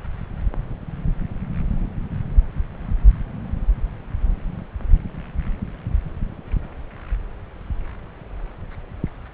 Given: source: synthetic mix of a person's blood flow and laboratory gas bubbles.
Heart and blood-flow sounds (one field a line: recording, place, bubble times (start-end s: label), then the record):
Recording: Doppler ultrasound of blood flow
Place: subclavian vein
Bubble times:
no bubbles
From the record:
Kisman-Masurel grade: 000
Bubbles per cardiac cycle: 0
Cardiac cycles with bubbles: 0%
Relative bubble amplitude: no bubbles discernible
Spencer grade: 0 (complete lack of bubble signals)